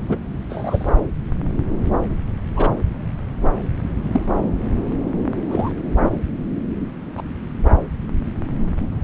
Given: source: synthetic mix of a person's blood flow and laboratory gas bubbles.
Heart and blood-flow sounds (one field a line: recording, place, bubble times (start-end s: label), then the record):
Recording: Doppler ultrasound of blood flow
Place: subclavian vein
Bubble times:
0.09-0.18 s: bubbles
0.49-0.94 s: bubbles
2.56-2.68 s: bubbles
4.12-4.24 s: bubbles
5.50-5.71 s: bubbles
7.17-7.21 s: bubbles
From the record:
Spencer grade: 2 (many but less than half of the cardiac periods contain bubble signals, singularly or in groups)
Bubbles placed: anywhere in the cardiac cycle